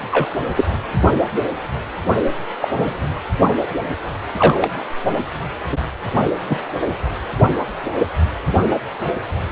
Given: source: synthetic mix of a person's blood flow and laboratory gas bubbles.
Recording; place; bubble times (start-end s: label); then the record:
Doppler ultrasound of blood flow; precordium
0.11-0.30 s: bubbles
0.55-0.65 s: bubbles
2.62-2.68 s: bubbles
2.77-2.94 s: bubbles
4.37-4.69 s: bubbles
6.49-6.59 s: bubbles
6.82-6.87 s: bubbles
From the record:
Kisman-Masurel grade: 123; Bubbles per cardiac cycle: 1 to 2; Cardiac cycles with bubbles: 10 to 50%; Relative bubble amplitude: loud (0.450 to 0.775); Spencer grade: 2 (many but less than half of the cardiac periods contain bubble signals, singularly or in groups); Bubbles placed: only in the low amplitude regions of the cardiac cycle